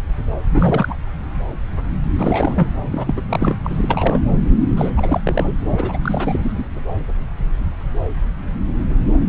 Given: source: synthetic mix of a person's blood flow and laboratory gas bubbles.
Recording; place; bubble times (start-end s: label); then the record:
Doppler ultrasound of blood flow; subclavian vein
0.50-0.96 s: bubbles
2.17-2.67 s: bubbles
2.88-3.21 s: bubbles
3.29-3.56 s: bubbles
3.64-4.20 s: bubbles
4.77-4.93 s: bubbles
4.96-5.21 s: bubbles
5.24-5.54 s: bubbles
5.78-5.99 s: bubbles
6.03-6.64 s: bubbles
From the record:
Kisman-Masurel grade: 332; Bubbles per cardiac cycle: rolling drumbeat, 9 or more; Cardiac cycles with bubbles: 50 to 99%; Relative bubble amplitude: moderate (0.250 to 0.450); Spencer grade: 3 (all of the cardiac periods contain showers or single bubble signals, but not dominating or overriding the cardiac motion signals); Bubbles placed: anywhere in the cardiac cycle